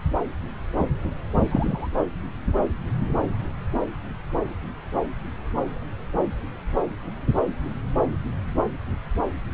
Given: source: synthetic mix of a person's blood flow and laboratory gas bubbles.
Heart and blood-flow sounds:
Doppler ultrasound of blood flow; subclavian vein
1.50-1.88 s: bubbles
From the record:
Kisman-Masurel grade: 112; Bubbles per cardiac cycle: 1 to 2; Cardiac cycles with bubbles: 1 to 10%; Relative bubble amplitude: moderate (0.250 to 0.450); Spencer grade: 1 (occasional bubble signal discernible with the cardiac motion signal, with majority of cardiac periods free of bubbles); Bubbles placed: anywhere in the cardiac cycle

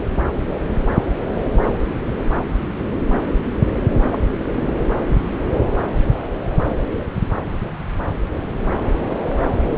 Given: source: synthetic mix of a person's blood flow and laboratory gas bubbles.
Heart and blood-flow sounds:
Doppler ultrasound of blood flow; subclavian vein
4.10-4.20 s: bubbles
4.56-4.72 s: bubbles
From the record:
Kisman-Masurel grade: 121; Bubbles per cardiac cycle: 1 to 2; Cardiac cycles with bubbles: 10 to 50%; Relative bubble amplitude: barely perceptible (0.100 to 0.250); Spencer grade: 2 (many but less than half of the cardiac periods contain bubble signals, singularly or in groups); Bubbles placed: anywhere in the cardiac cycle

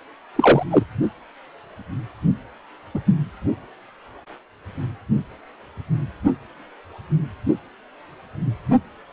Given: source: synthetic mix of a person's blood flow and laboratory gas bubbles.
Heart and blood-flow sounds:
Doppler ultrasound of blood flow; precordium
0.35-0.64 s: bubbles
0.70-0.83 s: bubbles
2.94-3.00 s: bubbles
3.06-3.15 s: bubbles
From the record:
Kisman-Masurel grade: 123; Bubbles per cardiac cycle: 1 to 2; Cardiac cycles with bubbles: 10 to 50%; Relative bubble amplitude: loud (0.450 to 0.775); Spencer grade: 2 (many but less than half of the cardiac periods contain bubble signals, singularly or in groups); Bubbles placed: only in the low amplitude regions of the cardiac cycle

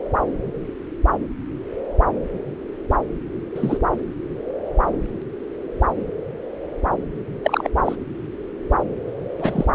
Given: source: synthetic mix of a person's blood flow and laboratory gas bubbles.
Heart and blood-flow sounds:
Doppler ultrasound of blood flow; subclavian vein
3.54-3.77 s: bubbles
7.44-7.68 s: bubbles
7.85-7.96 s: bubbles
9.39-9.64 s: bubbles
From the record:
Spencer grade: 2 (many but less than half of the cardiac periods contain bubble signals, singularly or in groups); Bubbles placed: anywhere in the cardiac cycle

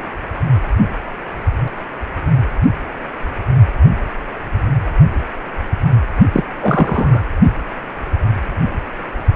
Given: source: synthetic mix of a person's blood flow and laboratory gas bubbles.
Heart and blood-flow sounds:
Doppler ultrasound of blood flow; precordium
6.33-6.44 s: bubbles
6.61-7.22 s: bubbles
From the record:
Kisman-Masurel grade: 213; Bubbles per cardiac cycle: several, 3 to 8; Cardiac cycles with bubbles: 1 to 10%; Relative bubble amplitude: loud (0.450 to 0.775); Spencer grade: 1 (occasional bubble signal discernible with the cardiac motion signal, with majority of cardiac periods free of bubbles); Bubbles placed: only in the low amplitude regions of the cardiac cycle

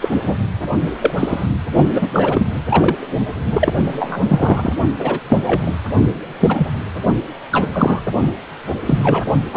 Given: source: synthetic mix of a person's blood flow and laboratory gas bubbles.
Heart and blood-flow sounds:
Doppler ultrasound of blood flow; precordium
0.01-0.08 s: bubbles
0.26-0.37 s: bubbles
1.00-1.14 s: bubbles
1.18-1.46 s: bubbles
1.93-2.08 s: bubbles
2.13-2.46 s: bubbles
2.69-2.97 s: bubbles
3.53-3.74 s: bubbles
3.83-4.21 s: bubbles
4.28-4.73 s: bubbles
4.98-5.19 s: bubbles
5.29-5.38 s: bubbles
5.45-5.71 s: bubbles
6.39-6.67 s: bubbles
7.51-7.68 s: bubbles
7.73-8.00 s: bubbles
8.86-9.24 s: bubbles
9.52-9.57 s: bubbles
From the record:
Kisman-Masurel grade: 243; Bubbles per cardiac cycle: several, 3 to 8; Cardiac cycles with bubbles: 100%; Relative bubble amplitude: loud (0.450 to 0.775); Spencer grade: 3 (all of the cardiac periods contain showers or single bubble signals, but not dominating or overriding the cardiac motion signals); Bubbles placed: only in the low amplitude regions of the cardiac cycle

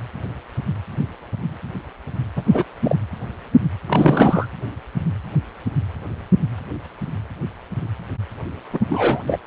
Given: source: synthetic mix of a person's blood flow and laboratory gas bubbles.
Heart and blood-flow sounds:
Doppler ultrasound of blood flow; precordium
2.35-2.43 s: bubbles
2.50-2.64 s: bubbles
2.83-2.96 s: bubbles
3.87-4.46 s: bubbles
8.72-8.79 s: bubbles
8.89-9.20 s: bubbles
9.27-9.38 s: bubbles
From the record:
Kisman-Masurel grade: 223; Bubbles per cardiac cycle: several, 3 to 8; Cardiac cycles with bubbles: 10 to 50%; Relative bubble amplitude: loud (0.450 to 0.775); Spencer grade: 2 (many but less than half of the cardiac periods contain bubble signals, singularly or in groups); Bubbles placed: anywhere in the cardiac cycle

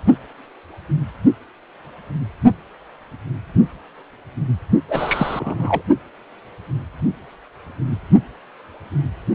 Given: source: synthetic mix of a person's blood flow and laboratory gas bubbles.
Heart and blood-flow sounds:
Doppler ultrasound of blood flow; precordium
4.89-5.82 s: bubbles
From the record:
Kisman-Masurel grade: 212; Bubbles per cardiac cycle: several, 3 to 8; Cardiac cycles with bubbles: 1 to 10%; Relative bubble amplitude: moderate (0.250 to 0.450); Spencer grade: 1 (occasional bubble signal discernible with the cardiac motion signal, with majority of cardiac periods free of bubbles); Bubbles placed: only in the low amplitude regions of the cardiac cycle

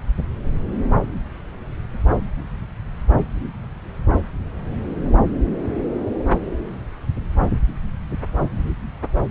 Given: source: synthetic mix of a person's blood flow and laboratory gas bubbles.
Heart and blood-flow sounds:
Doppler ultrasound of blood flow; subclavian vein
no bubbles
From the record:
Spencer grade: 0 (complete lack of bubble signals)

